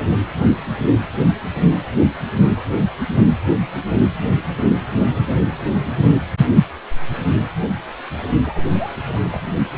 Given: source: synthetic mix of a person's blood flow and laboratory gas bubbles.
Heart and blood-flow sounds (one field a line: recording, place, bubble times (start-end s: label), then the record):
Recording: Doppler ultrasound of blood flow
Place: precordium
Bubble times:
8.43-8.65 s: bubbles
8.70-9.04 s: bubbles
9.07-9.44 s: bubbles
From the record:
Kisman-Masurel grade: 211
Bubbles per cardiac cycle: several, 3 to 8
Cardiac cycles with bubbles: 1 to 10%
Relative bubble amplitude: barely perceptible (0.100 to 0.250)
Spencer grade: 1 (occasional bubble signal discernible with the cardiac motion signal, with majority of cardiac periods free of bubbles)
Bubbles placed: anywhere in the cardiac cycle